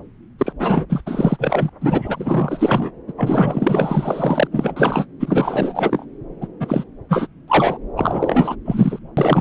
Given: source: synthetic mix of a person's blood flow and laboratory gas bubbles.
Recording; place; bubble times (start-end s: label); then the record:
Doppler ultrasound of blood flow; subclavian vein
0.38-0.53 s: bubbles
0.58-0.86 s: bubbles
0.89-1.02 s: bubbles
1.06-1.69 s: bubbles
1.81-2.91 s: bubbles
3.07-3.12 s: bubbles
3.17-4.48 s: bubbles
4.52-5.06 s: bubbles
5.20-6.05 s: bubbles
6.41-6.48 s: bubbles
6.60-6.84 s: bubbles
7.09-7.28 s: bubbles
7.48-7.79 s: bubbles
7.96-8.55 s: bubbles
8.64-8.99 s: bubbles
9.17-9.41 s: bubbles
From the record:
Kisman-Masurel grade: 444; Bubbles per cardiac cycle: continuous sound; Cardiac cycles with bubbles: 100%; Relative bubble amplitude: maximal (0.775 to 0.999); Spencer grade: 4 (maximum detectable bubble signal sounding continuously throughout systole and diastole of every cardiac period, and overriding the amplitude of the normal cardiac signals); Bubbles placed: anywhere in the cardiac cycle